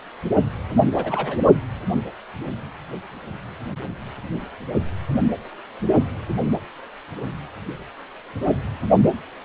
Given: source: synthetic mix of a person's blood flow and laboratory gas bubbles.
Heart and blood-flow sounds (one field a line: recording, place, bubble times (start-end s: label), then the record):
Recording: Doppler ultrasound of blood flow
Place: precordium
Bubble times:
0.96-1.40 s: bubbles
From the record:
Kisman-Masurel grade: 222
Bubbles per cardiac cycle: several, 3 to 8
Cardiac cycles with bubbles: 10 to 50%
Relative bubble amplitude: moderate (0.250 to 0.450)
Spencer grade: 2 (many but less than half of the cardiac periods contain bubble signals, singularly or in groups)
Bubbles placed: only in the low amplitude regions of the cardiac cycle